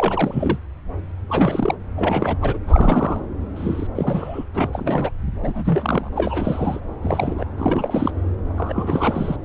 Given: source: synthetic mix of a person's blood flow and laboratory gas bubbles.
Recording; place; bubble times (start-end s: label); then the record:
Doppler ultrasound of blood flow; subclavian vein
0.00-0.58 s: bubbles
1.30-1.75 s: bubbles
1.96-2.38 s: bubbles
2.42-2.57 s: bubbles
2.67-3.25 s: bubbles
3.56-3.87 s: bubbles
3.95-4.45 s: bubbles
4.54-5.10 s: bubbles
5.42-6.10 s: bubbles
6.16-6.80 s: bubbles
7.02-7.46 s: bubbles
7.58-8.12 s: bubbles
8.57-9.36 s: bubbles
9.42-9.45 s: bubbles
From the record:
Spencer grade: 3 (all of the cardiac periods contain showers or single bubble signals, but not dominating or overriding the cardiac motion signals); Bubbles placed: anywhere in the cardiac cycle